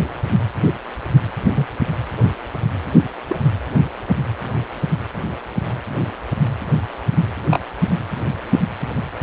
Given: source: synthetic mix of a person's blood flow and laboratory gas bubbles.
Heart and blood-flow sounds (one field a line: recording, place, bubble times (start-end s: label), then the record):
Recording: Doppler ultrasound of blood flow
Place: precordium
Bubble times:
1.54-1.67 s: bubbles
3.27-3.37 s: bubbles
7.50-7.60 s: bubbles
From the record:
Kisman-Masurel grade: 122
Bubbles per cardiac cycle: 1 to 2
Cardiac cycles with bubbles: 10 to 50%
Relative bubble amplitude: moderate (0.250 to 0.450)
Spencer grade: 2 (many but less than half of the cardiac periods contain bubble signals, singularly or in groups)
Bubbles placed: anywhere in the cardiac cycle